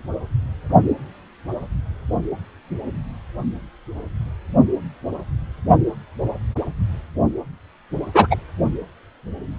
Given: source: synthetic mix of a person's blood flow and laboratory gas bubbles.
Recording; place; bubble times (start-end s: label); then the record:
Doppler ultrasound of blood flow; precordium
8.14-8.27 s: bubbles
8.30-8.37 s: bubbles
From the record:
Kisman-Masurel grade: 113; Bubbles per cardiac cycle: 1 to 2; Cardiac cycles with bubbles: 1 to 10%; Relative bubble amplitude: loud (0.450 to 0.775); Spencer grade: 1 (occasional bubble signal discernible with the cardiac motion signal, with majority of cardiac periods free of bubbles); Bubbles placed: only in the low amplitude regions of the cardiac cycle